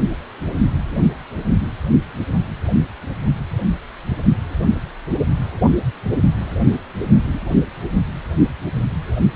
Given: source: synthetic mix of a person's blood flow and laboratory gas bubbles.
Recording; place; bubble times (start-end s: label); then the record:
Doppler ultrasound of blood flow; precordium
7.34-7.39 s: bubbles
From the record:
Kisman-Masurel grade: 112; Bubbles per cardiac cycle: 1 to 2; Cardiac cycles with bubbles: 1 to 10%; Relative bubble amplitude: moderate (0.250 to 0.450); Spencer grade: 1 (occasional bubble signal discernible with the cardiac motion signal, with majority of cardiac periods free of bubbles); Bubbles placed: anywhere in the cardiac cycle